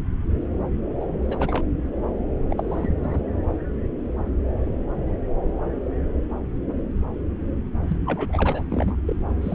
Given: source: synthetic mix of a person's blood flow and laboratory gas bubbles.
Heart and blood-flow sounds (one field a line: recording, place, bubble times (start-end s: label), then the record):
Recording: Doppler ultrasound of blood flow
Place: subclavian vein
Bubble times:
1.00-1.21 s: bubbles
1.27-1.65 s: bubbles
2.50-3.21 s: bubbles
7.83-7.96 s: bubbles
8.06-8.62 s: bubbles
8.71-8.96 s: bubbles
9.07-9.14 s: bubbles
9.41-9.55 s: bubbles
From the record:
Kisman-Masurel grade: 221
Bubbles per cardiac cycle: several, 3 to 8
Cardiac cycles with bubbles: 10 to 50%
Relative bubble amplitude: barely perceptible (0.100 to 0.250)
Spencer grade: 2 (many but less than half of the cardiac periods contain bubble signals, singularly or in groups)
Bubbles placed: anywhere in the cardiac cycle